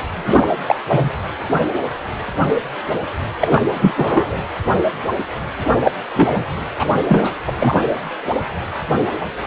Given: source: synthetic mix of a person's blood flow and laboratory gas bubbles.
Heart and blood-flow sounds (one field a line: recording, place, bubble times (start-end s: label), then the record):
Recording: Doppler ultrasound of blood flow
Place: precordium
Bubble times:
0.12-0.48 s: bubbles
0.67-0.76 s: bubbles
0.89-1.09 s: bubbles
3.40-3.65 s: bubbles
3.73-4.40 s: bubbles
5.84-5.92 s: bubbles
6.14-6.46 s: bubbles
6.78-6.88 s: bubbles
7.07-7.39 s: bubbles
7.46-7.53 s: bubbles
7.58-7.83 s: bubbles
From the record:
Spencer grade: 3 (all of the cardiac periods contain showers or single bubble signals, but not dominating or overriding the cardiac motion signals)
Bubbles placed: anywhere in the cardiac cycle